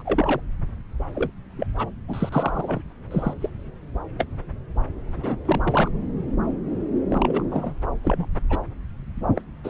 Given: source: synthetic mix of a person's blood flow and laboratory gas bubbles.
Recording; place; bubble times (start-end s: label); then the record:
Doppler ultrasound of blood flow; subclavian vein
0.00-0.02 s: bubbles
0.05-0.40 s: bubbles
1.15-1.30 s: bubbles
1.58-1.67 s: bubbles
1.78-1.89 s: bubbles
2.08-2.81 s: bubbles
3.10-3.33 s: bubbles
3.41-3.50 s: bubbles
4.19-4.25 s: bubbles
5.17-5.36 s: bubbles
5.45-5.90 s: bubbles
7.10-7.44 s: bubbles
7.51-7.72 s: bubbles
8.03-8.26 s: bubbles
8.49-8.59 s: bubbles
9.35-9.42 s: bubbles
9.64-9.70 s: bubbles
From the record:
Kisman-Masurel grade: 232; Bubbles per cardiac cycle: several, 3 to 8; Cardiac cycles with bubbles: 50 to 99%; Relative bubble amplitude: moderate (0.250 to 0.450); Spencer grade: 3 (all of the cardiac periods contain showers or single bubble signals, but not dominating or overriding the cardiac motion signals); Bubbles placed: anywhere in the cardiac cycle